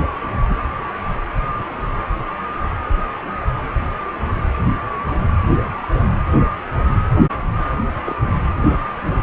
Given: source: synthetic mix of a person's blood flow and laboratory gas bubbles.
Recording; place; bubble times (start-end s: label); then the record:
Doppler ultrasound of blood flow; precordium
5.47-5.53 s: bubbles
5.82-5.88 s: bubbles
8.04-8.15 s: bubbles
From the record:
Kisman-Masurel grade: 121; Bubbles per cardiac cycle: 1 to 2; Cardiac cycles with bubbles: 10 to 50%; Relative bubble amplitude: barely perceptible (0.100 to 0.250); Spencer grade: 2 (many but less than half of the cardiac periods contain bubble signals, singularly or in groups); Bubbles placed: anywhere in the cardiac cycle